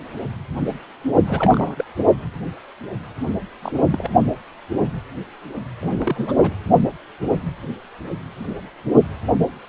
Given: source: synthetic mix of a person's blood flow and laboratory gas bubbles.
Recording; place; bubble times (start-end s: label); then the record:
Doppler ultrasound of blood flow; precordium
1.27-1.85 s: bubbles
3.62-3.71 s: bubbles
3.92-4.10 s: bubbles
5.82-6.33 s: bubbles
6.42-6.53 s: bubbles
From the record:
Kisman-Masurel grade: 221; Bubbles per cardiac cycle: several, 3 to 8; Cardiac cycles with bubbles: 10 to 50%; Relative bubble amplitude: barely perceptible (0.100 to 0.250); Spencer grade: 2 (many but less than half of the cardiac periods contain bubble signals, singularly or in groups); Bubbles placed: only in the low amplitude regions of the cardiac cycle